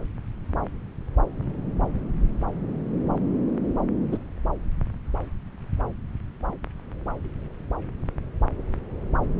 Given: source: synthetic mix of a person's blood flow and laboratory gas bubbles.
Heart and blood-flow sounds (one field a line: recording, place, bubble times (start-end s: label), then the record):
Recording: Doppler ultrasound of blood flow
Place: subclavian vein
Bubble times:
4.12-4.17 s: bubbles
From the record:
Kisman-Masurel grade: 113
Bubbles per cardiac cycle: 1 to 2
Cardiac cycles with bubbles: 1 to 10%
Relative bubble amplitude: loud (0.450 to 0.775)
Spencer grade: 1 (occasional bubble signal discernible with the cardiac motion signal, with majority of cardiac periods free of bubbles)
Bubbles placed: anywhere in the cardiac cycle